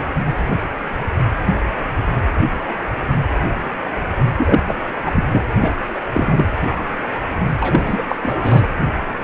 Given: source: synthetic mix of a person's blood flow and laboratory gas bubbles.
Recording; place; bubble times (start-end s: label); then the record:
Doppler ultrasound of blood flow; precordium
4.37-4.62 s: bubbles
4.67-4.77 s: bubbles
5.05-5.25 s: bubbles
5.31-5.44 s: bubbles
5.55-5.71 s: bubbles
6.12-6.50 s: bubbles
7.60-8.03 s: bubbles
8.08-8.15 s: bubbles
8.22-8.68 s: bubbles
From the record:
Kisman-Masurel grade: 223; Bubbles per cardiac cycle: several, 3 to 8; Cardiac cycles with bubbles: 10 to 50%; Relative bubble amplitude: loud (0.450 to 0.775); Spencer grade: 2 (many but less than half of the cardiac periods contain bubble signals, singularly or in groups); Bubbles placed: anywhere in the cardiac cycle